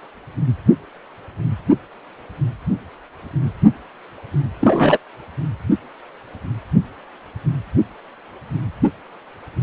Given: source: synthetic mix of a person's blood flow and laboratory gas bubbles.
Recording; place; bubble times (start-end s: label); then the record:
Doppler ultrasound of blood flow; precordium
4.61-4.97 s: bubbles
From the record:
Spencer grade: 1 (occasional bubble signal discernible with the cardiac motion signal, with majority of cardiac periods free of bubbles); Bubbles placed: anywhere in the cardiac cycle